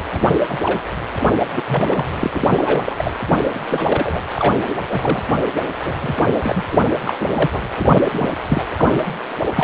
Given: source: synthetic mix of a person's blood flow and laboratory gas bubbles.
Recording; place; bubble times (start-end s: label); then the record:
Doppler ultrasound of blood flow; precordium
0.11-0.34 s: bubbles
0.51-0.58 s: bubbles
0.66-0.81 s: bubbles
1.39-1.44 s: bubbles
1.55-1.62 s: bubbles
1.67-2.05 s: bubbles
2.19-2.95 s: bubbles
2.98-3.11 s: bubbles
3.54-3.59 s: bubbles
3.69-4.21 s: bubbles
4.36-4.57 s: bubbles
4.88-5.24 s: bubbles
5.28-5.33 s: bubbles
5.84-5.95 s: bubbles
6.01-6.33 s: bubbles
6.42-6.64 s: bubbles
6.72-6.78 s: bubbles
6.81-6.89 s: bubbles
7.04-7.14 s: bubbles
7.20-7.27 s: bubbles
7.31-7.50 s: bubbles
7.53-7.62 s: bubbles
7.77-8.30 s: bubbles
8.46-8.63 s: bubbles
8.77-9.13 s: bubbles
9.55-9.64 s: bubbles
From the record:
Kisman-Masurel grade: 242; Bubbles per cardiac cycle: several, 3 to 8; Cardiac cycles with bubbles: 100%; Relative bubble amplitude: moderate (0.250 to 0.450); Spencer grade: 3 (all of the cardiac periods contain showers or single bubble signals, but not dominating or overriding the cardiac motion signals); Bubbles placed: anywhere in the cardiac cycle